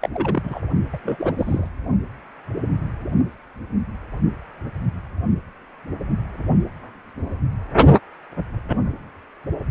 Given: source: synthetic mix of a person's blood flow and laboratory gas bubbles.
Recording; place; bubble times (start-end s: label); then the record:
Doppler ultrasound of blood flow; precordium
0.01-0.08 s: bubbles
0.13-0.61 s: bubbles
0.93-0.99 s: bubbles
1.03-1.32 s: bubbles
1.38-1.70 s: bubbles
From the record:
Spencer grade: 2 (many but less than half of the cardiac periods contain bubble signals, singularly or in groups); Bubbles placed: only in the low amplitude regions of the cardiac cycle